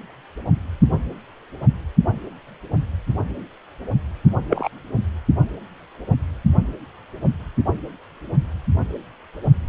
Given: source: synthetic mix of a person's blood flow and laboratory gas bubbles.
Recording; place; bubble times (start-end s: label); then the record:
Doppler ultrasound of blood flow; precordium
4.50-4.68 s: bubbles
From the record:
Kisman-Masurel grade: 112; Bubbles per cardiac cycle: 1 to 2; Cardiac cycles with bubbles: 1 to 10%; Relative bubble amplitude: moderate (0.250 to 0.450); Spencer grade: 1 (occasional bubble signal discernible with the cardiac motion signal, with majority of cardiac periods free of bubbles); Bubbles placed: only in the low amplitude regions of the cardiac cycle